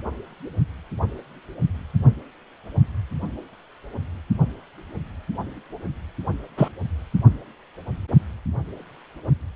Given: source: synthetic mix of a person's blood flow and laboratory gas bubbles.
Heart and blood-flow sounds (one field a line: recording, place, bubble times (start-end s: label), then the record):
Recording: Doppler ultrasound of blood flow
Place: precordium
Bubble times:
6.57-6.68 s: bubbles
From the record:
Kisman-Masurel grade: 113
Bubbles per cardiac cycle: 1 to 2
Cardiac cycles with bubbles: 1 to 10%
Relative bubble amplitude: loud (0.450 to 0.775)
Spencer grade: 1 (occasional bubble signal discernible with the cardiac motion signal, with majority of cardiac periods free of bubbles)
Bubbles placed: anywhere in the cardiac cycle